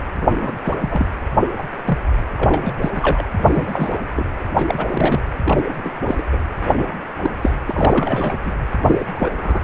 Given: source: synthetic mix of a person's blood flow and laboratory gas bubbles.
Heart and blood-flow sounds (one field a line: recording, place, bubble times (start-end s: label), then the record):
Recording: Doppler ultrasound of blood flow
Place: precordium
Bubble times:
0.00-0.04 s: bubbles
0.16-0.52 s: bubbles
0.64-0.74 s: bubbles
0.81-1.06 s: bubbles
1.40-1.47 s: bubbles
1.58-1.62 s: bubbles
1.85-1.98 s: bubbles
2.38-2.73 s: bubbles
2.81-2.90 s: bubbles
2.95-3.25 s: bubbles
3.46-3.98 s: bubbles
4.16-4.29 s: bubbles
4.49-5.21 s: bubbles
5.44-5.92 s: bubbles
6.01-6.23 s: bubbles
6.31-6.39 s: bubbles
6.77-6.88 s: bubbles
7.21-7.30 s: bubbles
7.42-7.51 s: bubbles
7.67-8.35 s: bubbles
8.45-8.53 s: bubbles
8.87-9.30 s: bubbles
9.43-9.64 s: bubbles
From the record:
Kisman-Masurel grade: 242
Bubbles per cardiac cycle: several, 3 to 8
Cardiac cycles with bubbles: 100%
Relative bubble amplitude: moderate (0.250 to 0.450)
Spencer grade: 3 (all of the cardiac periods contain showers or single bubble signals, but not dominating or overriding the cardiac motion signals)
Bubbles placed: anywhere in the cardiac cycle